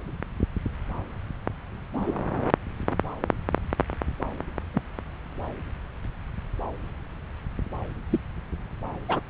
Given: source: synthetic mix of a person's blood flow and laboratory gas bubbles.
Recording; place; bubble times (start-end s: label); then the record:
Doppler ultrasound of blood flow; subclavian vein
1.95-2.12 s: bubbles
4.74-4.82 s: bubbles
8.09-8.20 s: bubbles
9.08-9.21 s: bubbles
From the record:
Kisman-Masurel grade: 122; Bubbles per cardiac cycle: 1 to 2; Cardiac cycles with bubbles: 10 to 50%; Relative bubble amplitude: moderate (0.250 to 0.450); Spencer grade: 2 (many but less than half of the cardiac periods contain bubble signals, singularly or in groups); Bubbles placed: anywhere in the cardiac cycle